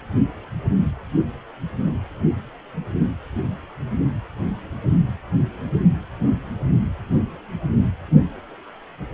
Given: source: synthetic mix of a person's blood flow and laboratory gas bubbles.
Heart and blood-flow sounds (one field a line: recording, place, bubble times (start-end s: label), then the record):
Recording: Doppler ultrasound of blood flow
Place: precordium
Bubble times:
no bubbles
From the record:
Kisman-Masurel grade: 000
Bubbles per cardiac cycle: 0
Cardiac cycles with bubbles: 0%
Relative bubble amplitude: no bubbles discernible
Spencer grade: 0 (complete lack of bubble signals)